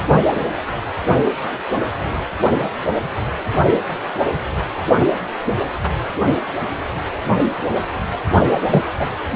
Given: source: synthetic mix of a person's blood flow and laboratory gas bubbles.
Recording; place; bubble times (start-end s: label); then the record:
Doppler ultrasound of blood flow; precordium
8.71-8.86 s: bubbles
8.99-9.06 s: bubbles
From the record:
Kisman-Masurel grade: 113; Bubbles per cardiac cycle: 1 to 2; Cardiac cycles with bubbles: 1 to 10%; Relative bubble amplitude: loud (0.450 to 0.775); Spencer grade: 1 (occasional bubble signal discernible with the cardiac motion signal, with majority of cardiac periods free of bubbles); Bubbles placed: only in the low amplitude regions of the cardiac cycle